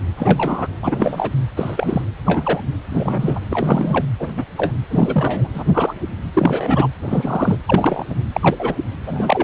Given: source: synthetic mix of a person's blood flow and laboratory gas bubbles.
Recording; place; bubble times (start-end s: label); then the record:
Doppler ultrasound of blood flow; precordium
0.17-0.68 s: bubbles
0.82-1.30 s: bubbles
1.57-2.02 s: bubbles
2.25-2.60 s: bubbles
2.91-3.40 s: bubbles
3.50-4.04 s: bubbles
4.19-4.28 s: bubbles
4.37-4.44 s: bubbles
4.57-4.73 s: bubbles
4.90-5.49 s: bubbles
5.54-5.64 s: bubbles
5.66-5.94 s: bubbles
6.33-6.88 s: bubbles
7.04-7.58 s: bubbles
7.67-8.04 s: bubbles
8.09-8.16 s: bubbles
8.32-8.74 s: bubbles
9.06-9.44 s: bubbles
From the record:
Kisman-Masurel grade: 243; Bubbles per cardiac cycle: several, 3 to 8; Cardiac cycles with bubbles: 100%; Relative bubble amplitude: loud (0.450 to 0.775); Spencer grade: 3 (all of the cardiac periods contain showers or single bubble signals, but not dominating or overriding the cardiac motion signals); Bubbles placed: anywhere in the cardiac cycle